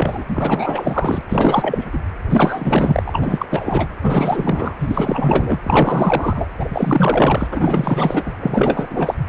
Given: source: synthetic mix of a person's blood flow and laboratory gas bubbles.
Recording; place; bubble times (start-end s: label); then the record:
Doppler ultrasound of blood flow; precordium
0.00-1.21 s: bubbles
1.27-1.90 s: bubbles
1.92-1.98 s: bubbles
2.29-3.46 s: bubbles
3.50-3.88 s: bubbles
4.02-4.74 s: bubbles
4.78-5.58 s: bubbles
5.62-6.45 s: bubbles
6.56-6.68 s: bubbles
6.70-7.48 s: bubbles
7.51-8.33 s: bubbles
8.40-9.14 s: bubbles
From the record:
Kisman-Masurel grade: 444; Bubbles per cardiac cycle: continuous sound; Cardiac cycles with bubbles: 100%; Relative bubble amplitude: maximal (0.775 to 0.999); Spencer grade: 4 (maximum detectable bubble signal sounding continuously throughout systole and diastole of every cardiac period, and overriding the amplitude of the normal cardiac signals); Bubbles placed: anywhere in the cardiac cycle